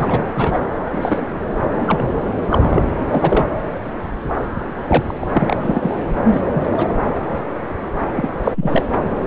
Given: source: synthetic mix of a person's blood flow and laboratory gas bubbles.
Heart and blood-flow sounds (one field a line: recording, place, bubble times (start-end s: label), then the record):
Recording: Doppler ultrasound of blood flow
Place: subclavian vein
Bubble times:
0.00-0.68 s: bubbles
0.90-1.28 s: bubbles
1.81-2.21 s: bubbles
2.44-2.48 s: bubbles
2.50-2.83 s: bubbles
2.87-2.95 s: bubbles
3.10-3.53 s: bubbles
4.86-5.28 s: bubbles
5.33-5.57 s: bubbles
5.65-5.97 s: bubbles
6.33-6.41 s: bubbles
6.53-6.70 s: bubbles
6.78-6.90 s: bubbles
8.15-8.29 s: bubbles
8.44-8.82 s: bubbles
From the record:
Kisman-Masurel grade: 232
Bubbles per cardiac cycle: several, 3 to 8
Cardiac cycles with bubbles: 50 to 99%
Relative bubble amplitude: moderate (0.250 to 0.450)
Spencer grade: 3 (all of the cardiac periods contain showers or single bubble signals, but not dominating or overriding the cardiac motion signals)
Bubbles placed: anywhere in the cardiac cycle